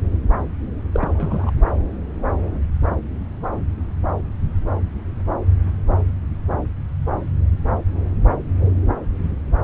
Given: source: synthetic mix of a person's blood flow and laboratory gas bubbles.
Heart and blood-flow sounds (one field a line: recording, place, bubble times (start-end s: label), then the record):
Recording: Doppler ultrasound of blood flow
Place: subclavian vein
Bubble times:
0.93-1.50 s: bubbles
From the record:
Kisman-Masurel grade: 212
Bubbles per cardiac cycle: several, 3 to 8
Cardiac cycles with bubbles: 1 to 10%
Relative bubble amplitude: moderate (0.250 to 0.450)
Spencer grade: 1 (occasional bubble signal discernible with the cardiac motion signal, with majority of cardiac periods free of bubbles)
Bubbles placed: anywhere in the cardiac cycle